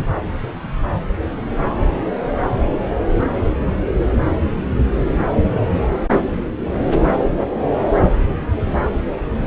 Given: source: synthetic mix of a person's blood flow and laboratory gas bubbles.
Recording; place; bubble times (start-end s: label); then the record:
Doppler ultrasound of blood flow; subclavian vein
no bubbles
From the record:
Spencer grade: 0 (complete lack of bubble signals)